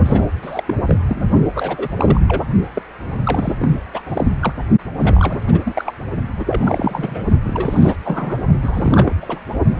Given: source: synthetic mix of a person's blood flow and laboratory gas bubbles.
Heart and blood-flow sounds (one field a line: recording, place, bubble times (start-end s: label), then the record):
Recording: Doppler ultrasound of blood flow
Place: precordium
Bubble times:
0.05-0.26 s: bubbles
0.42-0.64 s: bubbles
0.68-0.74 s: bubbles
0.85-0.96 s: bubbles
1.08-1.22 s: bubbles
1.54-1.89 s: bubbles
1.97-2.20 s: bubbles
2.28-2.42 s: bubbles
2.75-2.82 s: bubbles
3.24-3.54 s: bubbles
3.58-3.83 s: bubbles
3.94-4.01 s: bubbles
4.05-4.25 s: bubbles
4.39-4.53 s: bubbles
4.96-5.60 s: bubbles
5.64-5.94 s: bubbles
6.39-6.44 s: bubbles
6.47-7.23 s: bubbles
7.43-7.96 s: bubbles
8.04-8.38 s: bubbles
8.62-9.40 s: bubbles
From the record:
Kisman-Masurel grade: 342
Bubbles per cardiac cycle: rolling drumbeat, 9 or more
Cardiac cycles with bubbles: 100%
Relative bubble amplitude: moderate (0.250 to 0.450)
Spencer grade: 3 (all of the cardiac periods contain showers or single bubble signals, but not dominating or overriding the cardiac motion signals)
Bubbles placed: only in the low amplitude regions of the cardiac cycle